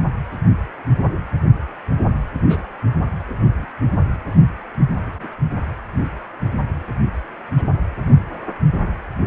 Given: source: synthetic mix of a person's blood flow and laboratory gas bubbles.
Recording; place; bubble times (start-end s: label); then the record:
Doppler ultrasound of blood flow; precordium
0.87-1.11 s: bubbles
2.33-2.62 s: bubbles
3.27-3.67 s: bubbles
4.91-5.12 s: bubbles
5.17-5.27 s: bubbles
7.56-7.65 s: bubbles
7.96-8.04 s: bubbles
From the record:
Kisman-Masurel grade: 121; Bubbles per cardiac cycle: 1 to 2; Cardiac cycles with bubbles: 10 to 50%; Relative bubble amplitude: barely perceptible (0.100 to 0.250); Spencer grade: 2 (many but less than half of the cardiac periods contain bubble signals, singularly or in groups); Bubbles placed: only in the low amplitude regions of the cardiac cycle